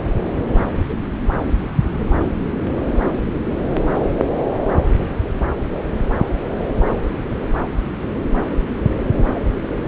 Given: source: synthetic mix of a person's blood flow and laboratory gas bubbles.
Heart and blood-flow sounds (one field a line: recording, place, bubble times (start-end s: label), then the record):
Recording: Doppler ultrasound of blood flow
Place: subclavian vein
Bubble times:
no bubbles
From the record:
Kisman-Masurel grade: 000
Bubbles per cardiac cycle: 0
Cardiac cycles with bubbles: 0%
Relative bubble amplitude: no bubbles discernible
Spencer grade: 0 (complete lack of bubble signals)